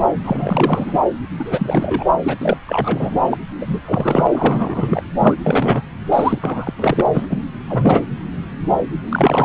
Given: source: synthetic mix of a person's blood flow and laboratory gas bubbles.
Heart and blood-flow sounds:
Doppler ultrasound of blood flow; subclavian vein
0.23-1.00 s: bubbles
1.39-2.06 s: bubbles
2.22-2.36 s: bubbles
2.40-2.57 s: bubbles
2.66-3.19 s: bubbles
3.30-3.38 s: bubbles
3.59-3.81 s: bubbles
3.85-4.28 s: bubbles
4.33-5.03 s: bubbles
5.19-5.35 s: bubbles
5.44-5.83 s: bubbles
6.12-6.39 s: bubbles
6.41-6.73 s: bubbles
6.77-7.10 s: bubbles
7.14-7.25 s: bubbles
7.29-7.38 s: bubbles
7.69-8.06 s: bubbles
9.09-9.45 s: bubbles
From the record:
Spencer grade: 3 (all of the cardiac periods contain showers or single bubble signals, but not dominating or overriding the cardiac motion signals); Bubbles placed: anywhere in the cardiac cycle

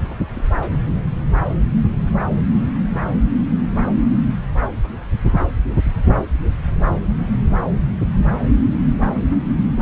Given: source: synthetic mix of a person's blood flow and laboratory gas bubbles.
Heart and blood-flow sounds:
Doppler ultrasound of blood flow; subclavian vein
0.34-0.48 s: bubbles
0.57-0.77 s: bubbles
From the record:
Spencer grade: 1 (occasional bubble signal discernible with the cardiac motion signal, with majority of cardiac periods free of bubbles); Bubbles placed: anywhere in the cardiac cycle

